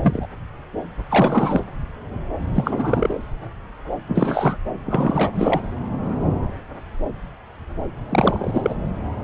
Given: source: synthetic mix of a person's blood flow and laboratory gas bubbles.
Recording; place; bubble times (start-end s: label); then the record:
Doppler ultrasound of blood flow; subclavian vein
0.02-0.27 s: bubbles
1.09-1.64 s: bubbles
2.53-3.19 s: bubbles
4.08-4.58 s: bubbles
4.86-5.31 s: bubbles
5.35-5.61 s: bubbles
8.09-8.75 s: bubbles
From the record:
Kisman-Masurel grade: 333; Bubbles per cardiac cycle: rolling drumbeat, 9 or more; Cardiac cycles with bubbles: 50 to 99%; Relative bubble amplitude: loud (0.450 to 0.775); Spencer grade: 3 (all of the cardiac periods contain showers or single bubble signals, but not dominating or overriding the cardiac motion signals); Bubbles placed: anywhere in the cardiac cycle